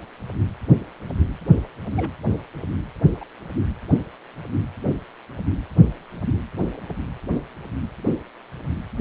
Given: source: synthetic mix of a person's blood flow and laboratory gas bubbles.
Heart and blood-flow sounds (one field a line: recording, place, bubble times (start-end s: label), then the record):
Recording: Doppler ultrasound of blood flow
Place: precordium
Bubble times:
1.96-2.10 s: bubbles
3.21-3.25 s: bubbles
From the record:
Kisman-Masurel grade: 121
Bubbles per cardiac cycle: 1 to 2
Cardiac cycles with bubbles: 10 to 50%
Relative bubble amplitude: barely perceptible (0.100 to 0.250)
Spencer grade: 2 (many but less than half of the cardiac periods contain bubble signals, singularly or in groups)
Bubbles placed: anywhere in the cardiac cycle